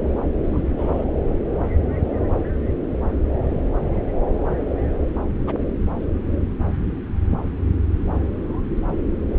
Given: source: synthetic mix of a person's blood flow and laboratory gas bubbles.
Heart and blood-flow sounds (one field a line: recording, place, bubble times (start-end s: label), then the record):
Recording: Doppler ultrasound of blood flow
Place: subclavian vein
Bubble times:
0.43-0.62 s: bubbles
0.78-1.05 s: bubbles
5.47-5.55 s: bubbles
From the record:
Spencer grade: 2 (many but less than half of the cardiac periods contain bubble signals, singularly or in groups)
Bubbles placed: anywhere in the cardiac cycle